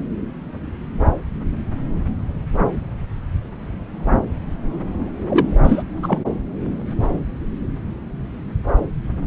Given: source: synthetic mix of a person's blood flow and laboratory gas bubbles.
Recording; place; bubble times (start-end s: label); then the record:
Doppler ultrasound of blood flow; subclavian vein
5.28-5.58 s: bubbles
5.63-5.83 s: bubbles
6.03-6.19 s: bubbles
From the record:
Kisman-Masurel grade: 213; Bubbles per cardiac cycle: several, 3 to 8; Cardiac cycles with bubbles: 1 to 10%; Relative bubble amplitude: loud (0.450 to 0.775); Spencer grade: 1 (occasional bubble signal discernible with the cardiac motion signal, with majority of cardiac periods free of bubbles); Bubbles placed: anywhere in the cardiac cycle